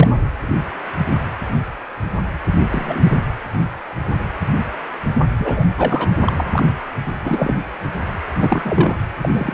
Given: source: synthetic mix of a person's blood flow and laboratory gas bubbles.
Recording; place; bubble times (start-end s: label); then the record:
Doppler ultrasound of blood flow; precordium
0.00-0.09 s: bubbles
2.70-3.21 s: bubbles
5.38-5.65 s: bubbles
5.77-6.08 s: bubbles
6.26-6.33 s: bubbles
6.35-6.63 s: bubbles
7.23-7.56 s: bubbles
8.42-8.95 s: bubbles
9.21-9.54 s: bubbles
From the record:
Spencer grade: 2 (many but less than half of the cardiac periods contain bubble signals, singularly or in groups); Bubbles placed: anywhere in the cardiac cycle